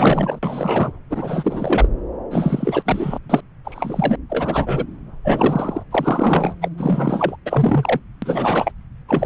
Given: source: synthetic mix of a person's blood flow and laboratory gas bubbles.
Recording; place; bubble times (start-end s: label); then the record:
Doppler ultrasound of blood flow; subclavian vein
0.00-0.39 s: bubbles
0.42-0.92 s: bubbles
1.09-1.88 s: bubbles
2.31-2.83 s: bubbles
2.85-3.19 s: bubbles
3.29-3.40 s: bubbles
3.65-4.16 s: bubbles
4.29-4.85 s: bubbles
5.25-5.83 s: bubbles
5.91-6.55 s: bubbles
6.61-6.69 s: bubbles
6.78-7.36 s: bubbles
7.46-8.00 s: bubbles
8.22-8.72 s: bubbles
9.08-9.26 s: bubbles
From the record:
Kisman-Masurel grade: 343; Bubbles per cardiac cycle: rolling drumbeat, 9 or more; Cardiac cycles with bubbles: 100%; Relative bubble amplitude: loud (0.450 to 0.775); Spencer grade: 3 (all of the cardiac periods contain showers or single bubble signals, but not dominating or overriding the cardiac motion signals); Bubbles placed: anywhere in the cardiac cycle